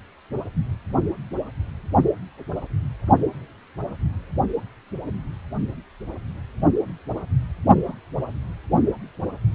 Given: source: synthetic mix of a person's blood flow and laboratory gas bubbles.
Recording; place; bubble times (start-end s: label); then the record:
Doppler ultrasound of blood flow; precordium
7.86-7.94 s: bubbles
From the record:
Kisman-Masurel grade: 111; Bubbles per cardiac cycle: 1 to 2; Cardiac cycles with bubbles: 1 to 10%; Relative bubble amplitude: barely perceptible (0.100 to 0.250); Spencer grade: 1 (occasional bubble signal discernible with the cardiac motion signal, with majority of cardiac periods free of bubbles); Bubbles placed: only in the low amplitude regions of the cardiac cycle